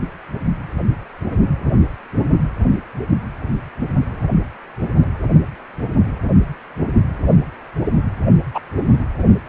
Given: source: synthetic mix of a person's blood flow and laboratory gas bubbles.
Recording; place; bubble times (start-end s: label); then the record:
Doppler ultrasound of blood flow; precordium
8.54-8.59 s: bubbles
From the record:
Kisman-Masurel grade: 113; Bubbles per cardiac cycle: 1 to 2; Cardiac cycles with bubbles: 1 to 10%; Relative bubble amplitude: loud (0.450 to 0.775); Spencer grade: 1 (occasional bubble signal discernible with the cardiac motion signal, with majority of cardiac periods free of bubbles); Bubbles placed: anywhere in the cardiac cycle